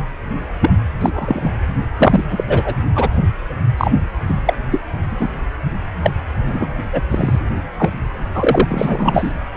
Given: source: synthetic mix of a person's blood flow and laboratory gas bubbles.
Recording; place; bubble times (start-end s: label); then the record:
Doppler ultrasound of blood flow; precordium
0.60-0.70 s: bubbles
1.00-1.50 s: bubbles
1.97-2.26 s: bubbles
2.31-2.44 s: bubbles
2.48-2.74 s: bubbles
2.95-3.09 s: bubbles
3.77-3.92 s: bubbles
4.27-4.34 s: bubbles
4.45-4.54 s: bubbles
4.71-4.80 s: bubbles
5.10-5.39 s: bubbles
6.03-6.11 s: bubbles
6.27-6.75 s: bubbles
6.92-7.01 s: bubbles
7.09-7.40 s: bubbles
7.55-7.58 s: bubbles
7.79-7.90 s: bubbles
8.34-9.32 s: bubbles
9.54-9.57 s: bubbles
From the record:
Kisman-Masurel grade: 243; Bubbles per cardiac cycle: several, 3 to 8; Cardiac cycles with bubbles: 100%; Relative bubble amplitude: loud (0.450 to 0.775); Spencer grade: 3 (all of the cardiac periods contain showers or single bubble signals, but not dominating or overriding the cardiac motion signals); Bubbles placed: anywhere in the cardiac cycle